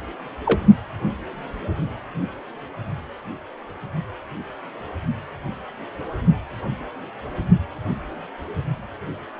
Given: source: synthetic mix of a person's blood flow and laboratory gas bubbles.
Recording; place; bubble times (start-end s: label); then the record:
Doppler ultrasound of blood flow; precordium
0.46-0.60 s: bubbles
From the record:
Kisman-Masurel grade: 112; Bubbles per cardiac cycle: 1 to 2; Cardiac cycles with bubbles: 1 to 10%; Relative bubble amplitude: moderate (0.250 to 0.450); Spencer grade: 1 (occasional bubble signal discernible with the cardiac motion signal, with majority of cardiac periods free of bubbles); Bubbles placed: only in the low amplitude regions of the cardiac cycle